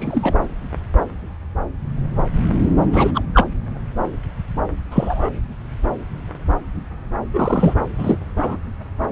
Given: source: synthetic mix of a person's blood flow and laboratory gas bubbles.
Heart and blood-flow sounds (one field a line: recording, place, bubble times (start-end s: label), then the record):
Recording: Doppler ultrasound of blood flow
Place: subclavian vein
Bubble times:
0.00-0.35 s: bubbles
2.92-3.22 s: bubbles
3.33-3.47 s: bubbles
4.91-5.29 s: bubbles
7.33-7.74 s: bubbles
7.98-8.17 s: bubbles
8.36-8.57 s: bubbles
From the record:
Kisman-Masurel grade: 223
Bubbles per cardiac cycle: several, 3 to 8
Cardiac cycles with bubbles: 10 to 50%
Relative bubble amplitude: loud (0.450 to 0.775)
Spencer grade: 2 (many but less than half of the cardiac periods contain bubble signals, singularly or in groups)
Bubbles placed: anywhere in the cardiac cycle